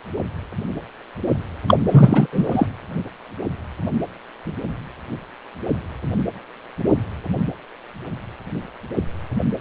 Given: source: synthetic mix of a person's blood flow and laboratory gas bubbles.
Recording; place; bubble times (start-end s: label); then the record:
Doppler ultrasound of blood flow; precordium
1.68-1.75 s: bubbles
1.89-2.27 s: bubbles
2.32-2.48 s: bubbles
2.51-2.67 s: bubbles
From the record:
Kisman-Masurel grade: 213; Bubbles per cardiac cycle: several, 3 to 8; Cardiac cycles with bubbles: 1 to 10%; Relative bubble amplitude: loud (0.450 to 0.775); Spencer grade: 1 (occasional bubble signal discernible with the cardiac motion signal, with majority of cardiac periods free of bubbles); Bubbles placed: anywhere in the cardiac cycle